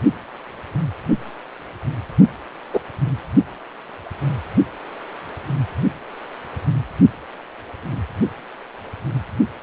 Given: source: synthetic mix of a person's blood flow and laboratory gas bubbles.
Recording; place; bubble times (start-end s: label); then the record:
Doppler ultrasound of blood flow; precordium
2.73-2.80 s: bubbles
From the record:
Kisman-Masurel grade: 113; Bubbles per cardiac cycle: 1 to 2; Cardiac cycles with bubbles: 1 to 10%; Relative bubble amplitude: loud (0.450 to 0.775); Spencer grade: 1 (occasional bubble signal discernible with the cardiac motion signal, with majority of cardiac periods free of bubbles); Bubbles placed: only in the low amplitude regions of the cardiac cycle